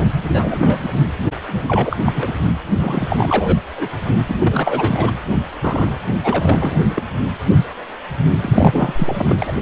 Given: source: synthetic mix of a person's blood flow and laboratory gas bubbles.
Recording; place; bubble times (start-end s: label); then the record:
Doppler ultrasound of blood flow; precordium
0.33-0.79 s: bubbles
0.82-0.99 s: bubbles
1.47-1.62 s: bubbles
1.68-1.97 s: bubbles
2.05-2.33 s: bubbles
2.79-3.58 s: bubbles
3.77-3.94 s: bubbles
4.17-4.24 s: bubbles
4.27-4.36 s: bubbles
4.39-5.11 s: bubbles
5.61-5.94 s: bubbles
6.23-6.86 s: bubbles
6.90-7.03 s: bubbles
8.42-8.93 s: bubbles
8.96-9.37 s: bubbles
9.42-9.53 s: bubbles
From the record:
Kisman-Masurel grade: 332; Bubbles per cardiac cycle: rolling drumbeat, 9 or more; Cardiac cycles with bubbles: 50 to 99%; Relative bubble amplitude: moderate (0.250 to 0.450); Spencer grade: 3 (all of the cardiac periods contain showers or single bubble signals, but not dominating or overriding the cardiac motion signals); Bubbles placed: anywhere in the cardiac cycle